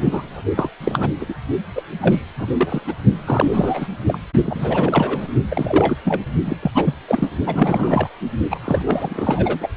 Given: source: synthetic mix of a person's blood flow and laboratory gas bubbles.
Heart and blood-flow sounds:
Doppler ultrasound of blood flow; precordium
0.04-0.42 s: bubbles
0.56-0.70 s: bubbles
0.80-1.10 s: bubbles
1.20-1.25 s: bubbles
1.28-1.34 s: bubbles
1.75-1.82 s: bubbles
2.01-2.23 s: bubbles
2.38-2.47 s: bubbles
2.58-2.81 s: bubbles
2.87-2.94 s: bubbles
3.25-3.88 s: bubbles
4.07-4.19 s: bubbles
4.43-5.28 s: bubbles
5.49-5.97 s: bubbles
6.04-6.21 s: bubbles
6.45-6.57 s: bubbles
6.62-6.71 s: bubbles
6.74-6.94 s: bubbles
7.08-7.30 s: bubbles
7.47-8.10 s: bubbles
8.50-8.60 s: bubbles
8.64-8.81 s: bubbles
8.85-9.68 s: bubbles
From the record:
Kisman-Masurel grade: 343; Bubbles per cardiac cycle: rolling drumbeat, 9 or more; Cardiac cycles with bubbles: 100%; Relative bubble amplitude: loud (0.450 to 0.775); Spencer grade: 3 (all of the cardiac periods contain showers or single bubble signals, but not dominating or overriding the cardiac motion signals); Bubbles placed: only in the low amplitude regions of the cardiac cycle

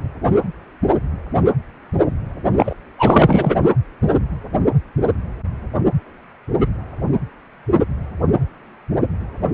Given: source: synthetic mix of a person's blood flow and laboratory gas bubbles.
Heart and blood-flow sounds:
Doppler ultrasound of blood flow; precordium
2.57-2.74 s: bubbles
2.98-3.55 s: bubbles
From the record:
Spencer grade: 1 (occasional bubble signal discernible with the cardiac motion signal, with majority of cardiac periods free of bubbles); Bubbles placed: anywhere in the cardiac cycle

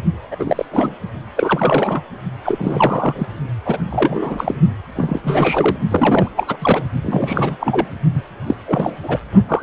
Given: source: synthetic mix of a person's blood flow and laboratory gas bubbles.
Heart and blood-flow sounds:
Doppler ultrasound of blood flow; precordium
0.00-0.04 s: bubbles
0.31-0.36 s: bubbles
0.39-0.66 s: bubbles
0.70-0.95 s: bubbles
1.36-2.02 s: bubbles
2.44-3.27 s: bubbles
3.64-3.78 s: bubbles
3.90-4.55 s: bubbles
4.96-5.20 s: bubbles
5.24-5.77 s: bubbles
5.91-6.31 s: bubbles
6.36-6.57 s: bubbles
6.60-6.83 s: bubbles
7.01-7.57 s: bubbles
7.60-7.87 s: bubbles
8.13-8.22 s: bubbles
8.46-8.54 s: bubbles
8.67-8.96 s: bubbles
9.03-9.19 s: bubbles
9.48-9.63 s: bubbles
From the record:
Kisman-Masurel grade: 343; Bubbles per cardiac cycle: rolling drumbeat, 9 or more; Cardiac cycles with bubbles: 100%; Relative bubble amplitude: loud (0.450 to 0.775); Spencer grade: 3 (all of the cardiac periods contain showers or single bubble signals, but not dominating or overriding the cardiac motion signals); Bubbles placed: only in the low amplitude regions of the cardiac cycle

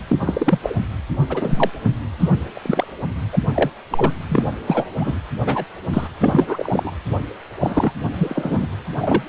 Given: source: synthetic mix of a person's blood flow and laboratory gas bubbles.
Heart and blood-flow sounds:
Doppler ultrasound of blood flow; precordium
0.08-0.16 s: bubbles
0.20-0.58 s: bubbles
0.62-0.74 s: bubbles
1.29-1.70 s: bubbles
2.19-2.29 s: bubbles
2.52-2.93 s: bubbles
3.32-3.38 s: bubbles
3.54-3.70 s: bubbles
3.91-4.12 s: bubbles
4.28-4.43 s: bubbles
4.67-4.87 s: bubbles
4.99-5.18 s: bubbles
5.45-5.65 s: bubbles
5.93-6.08 s: bubbles
6.20-6.92 s: bubbles
7.59-7.92 s: bubbles
8.12-8.66 s: bubbles
8.99-9.29 s: bubbles
From the record:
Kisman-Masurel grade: 243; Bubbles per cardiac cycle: several, 3 to 8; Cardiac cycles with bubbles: 100%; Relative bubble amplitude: loud (0.450 to 0.775); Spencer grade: 3 (all of the cardiac periods contain showers or single bubble signals, but not dominating or overriding the cardiac motion signals); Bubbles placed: anywhere in the cardiac cycle

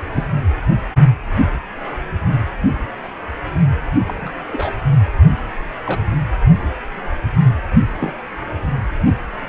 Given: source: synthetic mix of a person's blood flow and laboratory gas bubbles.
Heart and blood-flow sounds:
Doppler ultrasound of blood flow; precordium
0.11-0.26 s: bubbles
4.05-4.32 s: bubbles
4.52-4.74 s: bubbles
5.85-6.00 s: bubbles
8.00-8.12 s: bubbles
From the record:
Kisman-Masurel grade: 122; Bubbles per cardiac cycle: 1 to 2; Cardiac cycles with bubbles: 10 to 50%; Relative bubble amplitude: moderate (0.250 to 0.450); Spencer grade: 2 (many but less than half of the cardiac periods contain bubble signals, singularly or in groups); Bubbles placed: anywhere in the cardiac cycle

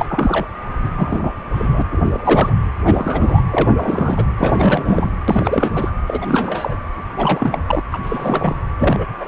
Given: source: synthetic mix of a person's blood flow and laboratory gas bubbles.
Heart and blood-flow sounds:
Doppler ultrasound of blood flow; precordium
0.00-0.05 s: bubbles
0.08-0.46 s: bubbles
0.83-0.90 s: bubbles
0.96-1.33 s: bubbles
1.52-1.82 s: bubbles
1.91-2.01 s: bubbles
2.04-2.53 s: bubbles
2.85-3.43 s: bubbles
3.50-3.73 s: bubbles
3.76-4.25 s: bubbles
4.37-5.11 s: bubbles
5.28-5.90 s: bubbles
6.07-6.76 s: bubbles
7.17-7.59 s: bubbles
7.67-7.82 s: bubbles
7.92-8.55 s: bubbles
8.79-9.06 s: bubbles
9.20-9.28 s: bubbles
From the record:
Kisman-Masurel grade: 342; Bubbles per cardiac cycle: rolling drumbeat, 9 or more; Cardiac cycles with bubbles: 100%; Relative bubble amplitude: moderate (0.250 to 0.450); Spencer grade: 3 (all of the cardiac periods contain showers or single bubble signals, but not dominating or overriding the cardiac motion signals); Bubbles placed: anywhere in the cardiac cycle

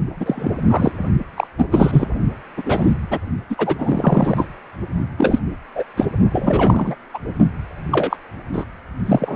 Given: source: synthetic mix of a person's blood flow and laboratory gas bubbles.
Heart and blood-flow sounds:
Doppler ultrasound of blood flow; precordium
0.20-0.50 s: bubbles
0.68-0.92 s: bubbles
1.36-1.47 s: bubbles
1.58-1.66 s: bubbles
1.71-2.09 s: bubbles
2.57-2.62 s: bubbles
2.65-2.94 s: bubbles
3.10-3.19 s: bubbles
3.50-3.76 s: bubbles
3.79-4.47 s: bubbles
5.17-5.39 s: bubbles
5.75-5.84 s: bubbles
5.96-6.06 s: bubbles
6.31-6.95 s: bubbles
7.13-7.18 s: bubbles
7.91-8.17 s: bubbles
8.53-8.65 s: bubbles
9.05-9.36 s: bubbles
From the record:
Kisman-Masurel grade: 243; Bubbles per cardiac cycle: several, 3 to 8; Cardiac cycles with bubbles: 100%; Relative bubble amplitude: loud (0.450 to 0.775); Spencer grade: 3 (all of the cardiac periods contain showers or single bubble signals, but not dominating or overriding the cardiac motion signals); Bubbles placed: only in the low amplitude regions of the cardiac cycle

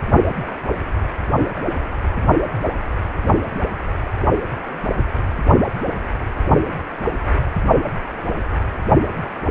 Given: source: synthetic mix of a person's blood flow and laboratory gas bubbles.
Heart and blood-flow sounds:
Doppler ultrasound of blood flow; precordium
no bubbles
From the record:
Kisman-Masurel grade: 000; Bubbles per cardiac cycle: 0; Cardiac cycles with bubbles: 0%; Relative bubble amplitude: no bubbles discernible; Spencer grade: 0 (complete lack of bubble signals)

